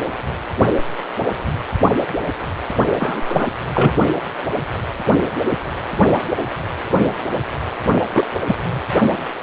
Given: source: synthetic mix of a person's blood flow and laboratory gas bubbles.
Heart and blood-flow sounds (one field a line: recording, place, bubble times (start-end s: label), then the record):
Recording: Doppler ultrasound of blood flow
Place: precordium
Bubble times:
2.98-3.47 s: bubbles
3.73-3.94 s: bubbles
8.13-8.25 s: bubbles
8.47-8.55 s: bubbles
8.72-8.81 s: bubbles
From the record:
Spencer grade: 2 (many but less than half of the cardiac periods contain bubble signals, singularly or in groups)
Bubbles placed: only in the low amplitude regions of the cardiac cycle